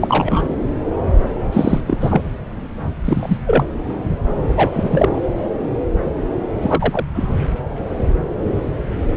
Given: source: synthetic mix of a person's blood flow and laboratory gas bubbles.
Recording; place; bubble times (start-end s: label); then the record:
Doppler ultrasound of blood flow; subclavian vein
0.00-0.42 s: bubbles
1.53-1.81 s: bubbles
1.86-1.98 s: bubbles
2.00-2.21 s: bubbles
3.04-3.37 s: bubbles
3.46-3.65 s: bubbles
4.56-5.20 s: bubbles
6.61-7.04 s: bubbles
7.14-7.29 s: bubbles
From the record:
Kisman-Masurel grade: 223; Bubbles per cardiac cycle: several, 3 to 8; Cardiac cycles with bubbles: 10 to 50%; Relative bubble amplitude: loud (0.450 to 0.775); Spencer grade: 2 (many but less than half of the cardiac periods contain bubble signals, singularly or in groups); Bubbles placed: anywhere in the cardiac cycle